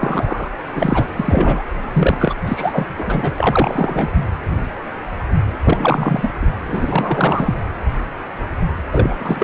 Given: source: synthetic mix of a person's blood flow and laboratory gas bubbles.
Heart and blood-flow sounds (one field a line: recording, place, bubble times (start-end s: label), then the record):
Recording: Doppler ultrasound of blood flow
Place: precordium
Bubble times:
0.00-0.49 s: bubbles
0.75-1.06 s: bubbles
1.16-1.64 s: bubbles
1.93-2.35 s: bubbles
2.46-2.87 s: bubbles
2.97-3.33 s: bubbles
3.38-4.09 s: bubbles
5.64-6.31 s: bubbles
6.41-6.46 s: bubbles
6.66-7.54 s: bubbles
8.92-9.15 s: bubbles
9.19-9.44 s: bubbles
From the record:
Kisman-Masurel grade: 333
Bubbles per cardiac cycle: rolling drumbeat, 9 or more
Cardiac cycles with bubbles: 50 to 99%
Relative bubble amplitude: loud (0.450 to 0.775)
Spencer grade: 3 (all of the cardiac periods contain showers or single bubble signals, but not dominating or overriding the cardiac motion signals)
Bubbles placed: anywhere in the cardiac cycle